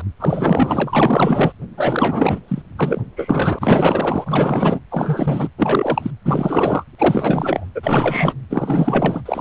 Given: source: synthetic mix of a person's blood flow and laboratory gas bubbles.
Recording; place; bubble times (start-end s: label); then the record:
Doppler ultrasound of blood flow; precordium
0.19-1.52 s: bubbles
1.77-2.40 s: bubbles
2.48-2.62 s: bubbles
2.77-3.04 s: bubbles
3.17-4.79 s: bubbles
4.91-5.49 s: bubbles
5.58-6.10 s: bubbles
6.25-6.83 s: bubbles
6.98-7.66 s: bubbles
7.75-8.33 s: bubbles
8.49-9.22 s: bubbles
9.26-9.41 s: bubbles
From the record:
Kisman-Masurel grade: 444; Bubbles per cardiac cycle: continuous sound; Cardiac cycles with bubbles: 100%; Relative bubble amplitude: maximal (0.775 to 0.999); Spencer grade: 4 (maximum detectable bubble signal sounding continuously throughout systole and diastole of every cardiac period, and overriding the amplitude of the normal cardiac signals); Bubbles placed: anywhere in the cardiac cycle